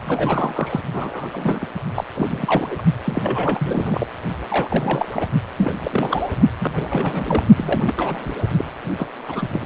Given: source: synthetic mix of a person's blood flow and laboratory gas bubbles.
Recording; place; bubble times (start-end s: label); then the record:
Doppler ultrasound of blood flow; precordium
0.04-0.81 s: bubbles
0.92-1.29 s: bubbles
1.33-1.67 s: bubbles
1.95-2.04 s: bubbles
2.13-2.82 s: bubbles
3.04-4.07 s: bubbles
4.50-5.08 s: bubbles
5.12-5.27 s: bubbles
5.58-6.28 s: bubbles
6.58-7.42 s: bubbles
7.57-7.83 s: bubbles
7.86-7.95 s: bubbles
7.97-8.21 s: bubbles
8.25-8.35 s: bubbles
8.57-8.71 s: bubbles
8.97-9.07 s: bubbles
9.26-9.48 s: bubbles
9.52-9.65 s: bubbles
From the record:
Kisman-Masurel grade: 342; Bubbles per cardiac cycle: rolling drumbeat, 9 or more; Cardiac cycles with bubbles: 100%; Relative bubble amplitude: moderate (0.250 to 0.450); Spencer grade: 3 (all of the cardiac periods contain showers or single bubble signals, but not dominating or overriding the cardiac motion signals); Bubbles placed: only in the low amplitude regions of the cardiac cycle